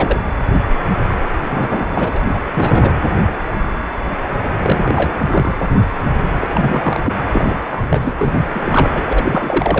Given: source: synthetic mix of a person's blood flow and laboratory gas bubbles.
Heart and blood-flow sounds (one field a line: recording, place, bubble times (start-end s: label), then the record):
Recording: Doppler ultrasound of blood flow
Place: precordium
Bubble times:
0.00-0.20 s: bubbles
1.49-2.19 s: bubbles
2.34-2.39 s: bubbles
2.54-2.95 s: bubbles
4.62-5.13 s: bubbles
5.17-5.57 s: bubbles
6.39-7.00 s: bubbles
7.03-7.13 s: bubbles
7.31-7.54 s: bubbles
7.69-7.84 s: bubbles
7.89-8.13 s: bubbles
8.19-8.47 s: bubbles
8.54-9.02 s: bubbles
9.10-9.80 s: bubbles
From the record:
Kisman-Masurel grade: 333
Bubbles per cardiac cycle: rolling drumbeat, 9 or more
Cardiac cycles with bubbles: 50 to 99%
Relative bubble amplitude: loud (0.450 to 0.775)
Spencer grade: 3 (all of the cardiac periods contain showers or single bubble signals, but not dominating or overriding the cardiac motion signals)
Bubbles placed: anywhere in the cardiac cycle